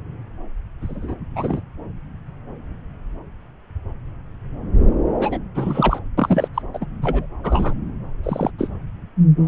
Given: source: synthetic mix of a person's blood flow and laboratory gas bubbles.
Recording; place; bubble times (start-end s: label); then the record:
Doppler ultrasound of blood flow; subclavian vein
0.82-1.15 s: bubbles
1.35-1.60 s: bubbles
5.20-5.38 s: bubbles
5.54-5.99 s: bubbles
6.17-6.48 s: bubbles
6.54-6.62 s: bubbles
6.74-6.86 s: bubbles
7.02-7.26 s: bubbles
7.44-7.73 s: bubbles
8.23-8.51 s: bubbles
8.58-8.69 s: bubbles
From the record:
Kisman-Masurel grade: 222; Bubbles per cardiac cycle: several, 3 to 8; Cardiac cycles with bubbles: 10 to 50%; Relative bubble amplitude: moderate (0.250 to 0.450); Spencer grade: 2 (many but less than half of the cardiac periods contain bubble signals, singularly or in groups); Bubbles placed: anywhere in the cardiac cycle